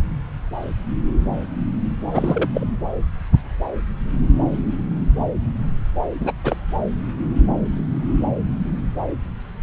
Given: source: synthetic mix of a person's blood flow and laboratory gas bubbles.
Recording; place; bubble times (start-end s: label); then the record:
Doppler ultrasound of blood flow; subclavian vein
2.13-2.50 s: bubbles
2.54-2.67 s: bubbles
6.20-6.33 s: bubbles
6.44-6.56 s: bubbles
From the record:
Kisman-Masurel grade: 222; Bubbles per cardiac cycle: several, 3 to 8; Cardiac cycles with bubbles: 10 to 50%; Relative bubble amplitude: moderate (0.250 to 0.450); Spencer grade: 2 (many but less than half of the cardiac periods contain bubble signals, singularly or in groups); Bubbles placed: anywhere in the cardiac cycle